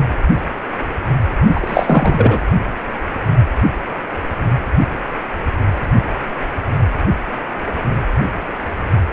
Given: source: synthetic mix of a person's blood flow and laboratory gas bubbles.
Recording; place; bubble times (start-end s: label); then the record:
Doppler ultrasound of blood flow; precordium
1.46-2.40 s: bubbles
From the record:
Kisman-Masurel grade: 223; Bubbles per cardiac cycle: several, 3 to 8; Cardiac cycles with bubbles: 10 to 50%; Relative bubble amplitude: loud (0.450 to 0.775); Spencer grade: 2 (many but less than half of the cardiac periods contain bubble signals, singularly or in groups); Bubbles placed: anywhere in the cardiac cycle